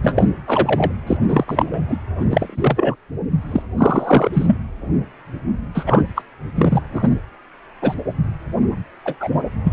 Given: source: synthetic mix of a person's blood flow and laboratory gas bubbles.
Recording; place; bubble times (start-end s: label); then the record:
Doppler ultrasound of blood flow; precordium
0.02-0.28 s: bubbles
0.47-0.91 s: bubbles
1.07-1.17 s: bubbles
1.28-1.45 s: bubbles
1.47-1.82 s: bubbles
1.88-1.99 s: bubbles
2.19-2.25 s: bubbles
2.30-2.96 s: bubbles
3.50-3.62 s: bubbles
3.77-4.29 s: bubbles
4.33-4.58 s: bubbles
5.74-6.03 s: bubbles
6.15-6.22 s: bubbles
6.55-6.82 s: bubbles
6.92-7.09 s: bubbles
7.81-7.94 s: bubbles
9.05-9.15 s: bubbles
9.20-9.29 s: bubbles
9.63-9.73 s: bubbles
From the record:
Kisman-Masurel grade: 233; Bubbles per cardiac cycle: several, 3 to 8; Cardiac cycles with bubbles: 50 to 99%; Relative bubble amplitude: loud (0.450 to 0.775); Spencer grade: 3 (all of the cardiac periods contain showers or single bubble signals, but not dominating or overriding the cardiac motion signals); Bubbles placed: anywhere in the cardiac cycle